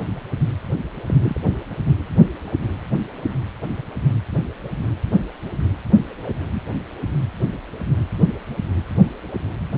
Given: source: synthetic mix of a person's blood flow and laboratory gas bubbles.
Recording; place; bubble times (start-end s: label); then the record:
Doppler ultrasound of blood flow; precordium
1.06-1.15 s: bubbles
1.22-1.39 s: bubbles
From the record:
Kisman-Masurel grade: 111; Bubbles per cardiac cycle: 1 to 2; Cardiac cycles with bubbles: 1 to 10%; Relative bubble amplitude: barely perceptible (0.100 to 0.250); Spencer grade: 1 (occasional bubble signal discernible with the cardiac motion signal, with majority of cardiac periods free of bubbles); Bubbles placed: anywhere in the cardiac cycle